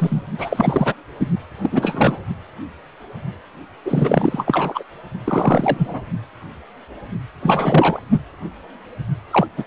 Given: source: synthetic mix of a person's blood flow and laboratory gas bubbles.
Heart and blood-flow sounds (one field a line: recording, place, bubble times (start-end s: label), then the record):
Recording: Doppler ultrasound of blood flow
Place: precordium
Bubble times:
0.00-0.23 s: bubbles
0.38-0.94 s: bubbles
1.19-1.27 s: bubbles
1.62-2.18 s: bubbles
3.85-4.83 s: bubbles
5.24-6.02 s: bubbles
7.43-8.00 s: bubbles
9.31-9.47 s: bubbles
9.57-9.64 s: bubbles
From the record:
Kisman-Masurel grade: 333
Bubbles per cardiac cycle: rolling drumbeat, 9 or more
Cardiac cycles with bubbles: 50 to 99%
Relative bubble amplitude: loud (0.450 to 0.775)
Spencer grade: 3 (all of the cardiac periods contain showers or single bubble signals, but not dominating or overriding the cardiac motion signals)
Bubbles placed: only in the low amplitude regions of the cardiac cycle